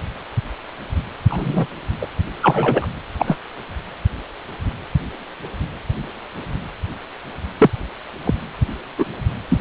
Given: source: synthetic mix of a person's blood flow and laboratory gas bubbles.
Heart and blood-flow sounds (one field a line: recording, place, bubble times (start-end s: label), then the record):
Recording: Doppler ultrasound of blood flow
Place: precordium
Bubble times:
1.29-1.67 s: bubbles
2.00-2.07 s: bubbles
2.42-2.87 s: bubbles
3.19-3.38 s: bubbles
7.58-7.70 s: bubbles
8.24-8.35 s: bubbles
8.98-9.06 s: bubbles
9.49-9.58 s: bubbles
From the record:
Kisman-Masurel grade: 123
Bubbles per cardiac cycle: 1 to 2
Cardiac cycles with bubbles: 10 to 50%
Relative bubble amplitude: loud (0.450 to 0.775)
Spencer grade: 2 (many but less than half of the cardiac periods contain bubble signals, singularly or in groups)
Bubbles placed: anywhere in the cardiac cycle